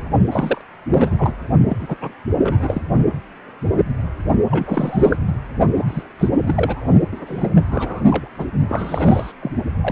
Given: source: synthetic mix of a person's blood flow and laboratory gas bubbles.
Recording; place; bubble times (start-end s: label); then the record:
Doppler ultrasound of blood flow; precordium
0.30-0.61 s: bubbles
0.91-1.32 s: bubbles
1.68-1.95 s: bubbles
2.00-2.12 s: bubbles
2.39-2.82 s: bubbles
4.50-5.17 s: bubbles
5.25-5.34 s: bubbles
5.76-6.03 s: bubbles
6.18-6.29 s: bubbles
6.32-6.88 s: bubbles
7.11-7.49 s: bubbles
7.54-7.62 s: bubbles
7.71-8.02 s: bubbles
8.10-8.28 s: bubbles
8.38-8.46 s: bubbles
8.69-9.32 s: bubbles
9.41-9.51 s: bubbles
9.81-9.92 s: bubbles
From the record:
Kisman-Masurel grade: 332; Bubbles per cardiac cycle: rolling drumbeat, 9 or more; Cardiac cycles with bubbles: 50 to 99%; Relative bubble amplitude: moderate (0.250 to 0.450); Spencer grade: 3 (all of the cardiac periods contain showers or single bubble signals, but not dominating or overriding the cardiac motion signals); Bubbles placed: only in the low amplitude regions of the cardiac cycle